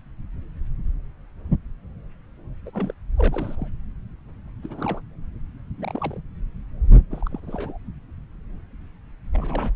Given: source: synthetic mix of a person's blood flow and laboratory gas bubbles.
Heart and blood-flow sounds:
Doppler ultrasound of blood flow; subclavian vein
2.65-2.70 s: bubbles
2.73-2.94 s: bubbles
3.17-3.68 s: bubbles
4.63-5.00 s: bubbles
5.77-6.19 s: bubbles
7.11-7.27 s: bubbles
7.31-7.40 s: bubbles
7.42-7.77 s: bubbles
9.33-9.73 s: bubbles
From the record:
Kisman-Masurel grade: 221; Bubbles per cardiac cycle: several, 3 to 8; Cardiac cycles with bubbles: 10 to 50%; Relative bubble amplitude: barely perceptible (0.100 to 0.250); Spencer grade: 2 (many but less than half of the cardiac periods contain bubble signals, singularly or in groups); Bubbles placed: anywhere in the cardiac cycle

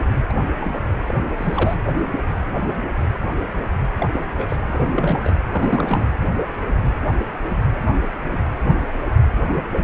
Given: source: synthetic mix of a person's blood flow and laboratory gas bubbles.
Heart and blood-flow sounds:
Doppler ultrasound of blood flow; precordium
0.29-0.33 s: bubbles
0.60-0.80 s: bubbles
1.06-1.15 s: bubbles
1.37-1.75 s: bubbles
3.98-4.25 s: bubbles
4.36-4.57 s: bubbles
4.67-5.34 s: bubbles
5.52-6.06 s: bubbles
From the record:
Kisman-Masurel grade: 222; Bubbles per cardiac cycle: several, 3 to 8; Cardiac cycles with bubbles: 10 to 50%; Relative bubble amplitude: moderate (0.250 to 0.450); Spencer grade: 2 (many but less than half of the cardiac periods contain bubble signals, singularly or in groups); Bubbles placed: anywhere in the cardiac cycle

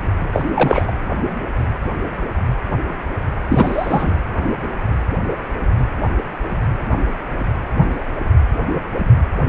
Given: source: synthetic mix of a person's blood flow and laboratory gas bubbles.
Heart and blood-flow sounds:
Doppler ultrasound of blood flow; precordium
0.32-0.45 s: bubbles
0.55-0.92 s: bubbles
3.49-4.14 s: bubbles
From the record:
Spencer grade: 1 (occasional bubble signal discernible with the cardiac motion signal, with majority of cardiac periods free of bubbles); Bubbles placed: anywhere in the cardiac cycle

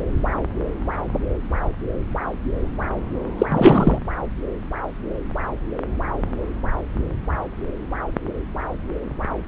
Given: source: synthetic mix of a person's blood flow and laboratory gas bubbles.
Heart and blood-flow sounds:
Doppler ultrasound of blood flow; subclavian vein
3.38-3.46 s: bubbles
3.50-3.99 s: bubbles
From the record:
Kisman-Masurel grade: 213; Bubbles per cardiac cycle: several, 3 to 8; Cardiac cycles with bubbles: 1 to 10%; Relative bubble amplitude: loud (0.450 to 0.775); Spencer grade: 1 (occasional bubble signal discernible with the cardiac motion signal, with majority of cardiac periods free of bubbles); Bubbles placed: anywhere in the cardiac cycle

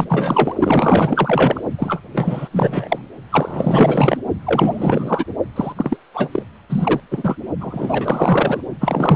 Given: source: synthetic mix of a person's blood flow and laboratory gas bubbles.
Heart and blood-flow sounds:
Doppler ultrasound of blood flow; precordium
0.00-0.05 s: bubbles
0.09-0.55 s: bubbles
0.59-1.61 s: bubbles
1.78-2.02 s: bubbles
2.13-2.48 s: bubbles
2.51-3.08 s: bubbles
3.30-4.17 s: bubbles
4.46-5.25 s: bubbles
5.55-5.72 s: bubbles
5.76-5.97 s: bubbles
6.13-6.42 s: bubbles
6.69-7.00 s: bubbles
7.11-7.36 s: bubbles
7.60-8.61 s: bubbles
8.80-9.16 s: bubbles
From the record:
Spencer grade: 4 (maximum detectable bubble signal sounding continuously throughout systole and diastole of every cardiac period, and overriding the amplitude of the normal cardiac signals); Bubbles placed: only in the low amplitude regions of the cardiac cycle

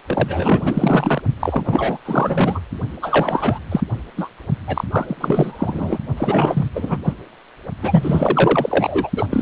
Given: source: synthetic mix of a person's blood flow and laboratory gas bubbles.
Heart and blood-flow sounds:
Doppler ultrasound of blood flow; precordium
0.07-1.22 s: bubbles
1.40-1.98 s: bubbles
2.05-2.60 s: bubbles
3.02-3.59 s: bubbles
3.71-3.81 s: bubbles
4.16-4.29 s: bubbles
4.67-4.84 s: bubbles
4.89-5.98 s: bubbles
6.16-6.68 s: bubbles
6.74-6.98 s: bubbles
7.03-7.14 s: bubbles
7.81-9.10 s: bubbles
9.15-9.27 s: bubbles
9.30-9.42 s: bubbles
From the record:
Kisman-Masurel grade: 444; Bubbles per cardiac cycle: continuous sound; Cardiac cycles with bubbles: 100%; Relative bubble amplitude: maximal (0.775 to 0.999); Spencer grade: 4 (maximum detectable bubble signal sounding continuously throughout systole and diastole of every cardiac period, and overriding the amplitude of the normal cardiac signals); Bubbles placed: only in the low amplitude regions of the cardiac cycle

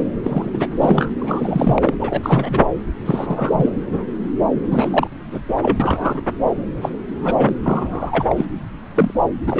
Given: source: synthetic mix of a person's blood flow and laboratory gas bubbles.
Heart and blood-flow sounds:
Doppler ultrasound of blood flow; subclavian vein
0.00-0.03 s: bubbles
0.23-0.68 s: bubbles
0.80-1.11 s: bubbles
1.19-1.95 s: bubbles
1.99-2.67 s: bubbles
3.05-3.69 s: bubbles
4.71-5.08 s: bubbles
5.31-5.40 s: bubbles
5.62-5.77 s: bubbles
5.79-6.21 s: bubbles
6.82-6.89 s: bubbles
7.09-7.52 s: bubbles
7.63-8.26 s: bubbles
8.29-8.46 s: bubbles
8.95-9.11 s: bubbles
9.46-9.60 s: bubbles
From the record:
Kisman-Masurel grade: 242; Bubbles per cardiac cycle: several, 3 to 8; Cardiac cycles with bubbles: 100%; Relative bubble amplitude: moderate (0.250 to 0.450); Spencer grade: 3 (all of the cardiac periods contain showers or single bubble signals, but not dominating or overriding the cardiac motion signals); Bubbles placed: anywhere in the cardiac cycle

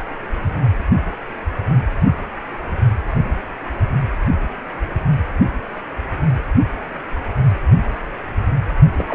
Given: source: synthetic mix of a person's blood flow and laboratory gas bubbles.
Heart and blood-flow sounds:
Doppler ultrasound of blood flow; precordium
8.97-9.15 s: bubbles
From the record:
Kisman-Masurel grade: 212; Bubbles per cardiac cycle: several, 3 to 8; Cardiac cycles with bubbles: 1 to 10%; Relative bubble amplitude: moderate (0.250 to 0.450); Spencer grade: 1 (occasional bubble signal discernible with the cardiac motion signal, with majority of cardiac periods free of bubbles); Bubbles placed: anywhere in the cardiac cycle

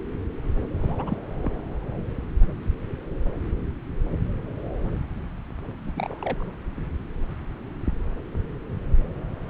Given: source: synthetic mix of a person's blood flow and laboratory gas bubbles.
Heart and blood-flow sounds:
Doppler ultrasound of blood flow; subclavian vein
0.79-1.17 s: bubbles
1.43-1.51 s: bubbles
5.87-5.91 s: bubbles
5.96-6.44 s: bubbles
From the record:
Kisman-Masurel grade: 221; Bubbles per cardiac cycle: several, 3 to 8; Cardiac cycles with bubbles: 10 to 50%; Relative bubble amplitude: barely perceptible (0.100 to 0.250); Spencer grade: 2 (many but less than half of the cardiac periods contain bubble signals, singularly or in groups); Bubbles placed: anywhere in the cardiac cycle

